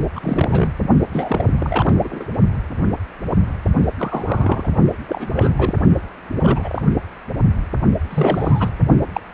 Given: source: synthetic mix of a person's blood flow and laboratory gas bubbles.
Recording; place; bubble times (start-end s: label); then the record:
Doppler ultrasound of blood flow; precordium
0.15-0.73 s: bubbles
1.12-1.53 s: bubbles
1.58-2.25 s: bubbles
3.97-4.69 s: bubbles
5.08-5.51 s: bubbles
5.57-5.75 s: bubbles
6.41-6.82 s: bubbles
8.10-8.71 s: bubbles
9.12-9.21 s: bubbles
From the record:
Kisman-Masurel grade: 232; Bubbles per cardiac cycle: several, 3 to 8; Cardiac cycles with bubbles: 50 to 99%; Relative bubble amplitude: moderate (0.250 to 0.450); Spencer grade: 3 (all of the cardiac periods contain showers or single bubble signals, but not dominating or overriding the cardiac motion signals); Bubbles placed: only in the low amplitude regions of the cardiac cycle